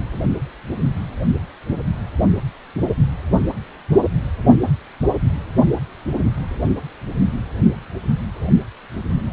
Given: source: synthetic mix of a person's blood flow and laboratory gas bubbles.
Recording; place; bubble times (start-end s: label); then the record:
Doppler ultrasound of blood flow; precordium
no bubbles
From the record:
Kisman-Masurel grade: 000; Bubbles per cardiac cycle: 0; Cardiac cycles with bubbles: 0%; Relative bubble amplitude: no bubbles discernible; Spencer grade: 0 (complete lack of bubble signals)